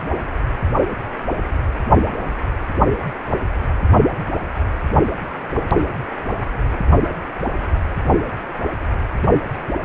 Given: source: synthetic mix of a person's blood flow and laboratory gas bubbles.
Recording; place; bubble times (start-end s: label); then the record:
Doppler ultrasound of blood flow; precordium
no bubbles
From the record:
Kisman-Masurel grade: 000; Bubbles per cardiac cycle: 0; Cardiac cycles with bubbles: 0%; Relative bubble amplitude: no bubbles discernible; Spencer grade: 0 (complete lack of bubble signals)